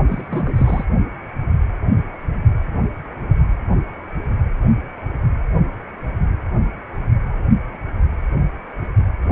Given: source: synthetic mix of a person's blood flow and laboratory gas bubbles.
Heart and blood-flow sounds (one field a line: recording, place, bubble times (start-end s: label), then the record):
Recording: Doppler ultrasound of blood flow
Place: precordium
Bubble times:
0.08-0.85 s: bubbles
From the record:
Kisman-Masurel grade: 211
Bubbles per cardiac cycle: several, 3 to 8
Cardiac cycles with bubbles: 1 to 10%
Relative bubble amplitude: barely perceptible (0.100 to 0.250)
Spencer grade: 1 (occasional bubble signal discernible with the cardiac motion signal, with majority of cardiac periods free of bubbles)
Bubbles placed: only in the low amplitude regions of the cardiac cycle